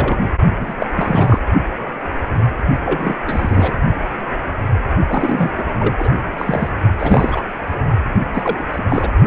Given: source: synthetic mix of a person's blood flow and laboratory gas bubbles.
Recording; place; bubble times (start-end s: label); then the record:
Doppler ultrasound of blood flow; precordium
0.00-0.17 s: bubbles
0.61-0.74 s: bubbles
0.79-0.86 s: bubbles
0.96-1.39 s: bubbles
2.85-3.15 s: bubbles
3.26-3.77 s: bubbles
5.08-5.50 s: bubbles
5.58-5.63 s: bubbles
5.79-5.94 s: bubbles
5.98-6.08 s: bubbles
6.38-6.70 s: bubbles
6.99-7.44 s: bubbles
8.33-8.64 s: bubbles
8.71-9.11 s: bubbles
From the record:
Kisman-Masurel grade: 332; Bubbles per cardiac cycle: rolling drumbeat, 9 or more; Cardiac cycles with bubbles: 50 to 99%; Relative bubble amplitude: moderate (0.250 to 0.450); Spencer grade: 3 (all of the cardiac periods contain showers or single bubble signals, but not dominating or overriding the cardiac motion signals); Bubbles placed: only in the low amplitude regions of the cardiac cycle